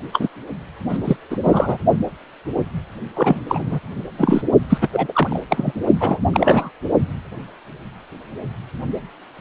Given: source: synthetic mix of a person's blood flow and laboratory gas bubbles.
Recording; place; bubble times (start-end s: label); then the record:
Doppler ultrasound of blood flow; precordium
0.12-0.29 s: bubbles
0.89-0.98 s: bubbles
1.04-1.17 s: bubbles
1.30-1.38 s: bubbles
1.44-1.77 s: bubbles
3.15-3.42 s: bubbles
3.48-3.79 s: bubbles
4.18-4.42 s: bubbles
4.70-4.78 s: bubbles
4.81-4.88 s: bubbles
4.92-5.39 s: bubbles
5.50-5.72 s: bubbles
6.00-6.18 s: bubbles
6.32-6.71 s: bubbles
From the record:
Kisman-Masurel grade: 333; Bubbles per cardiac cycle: rolling drumbeat, 9 or more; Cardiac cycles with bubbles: 50 to 99%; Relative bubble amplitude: loud (0.450 to 0.775); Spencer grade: 3 (all of the cardiac periods contain showers or single bubble signals, but not dominating or overriding the cardiac motion signals); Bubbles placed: only in the low amplitude regions of the cardiac cycle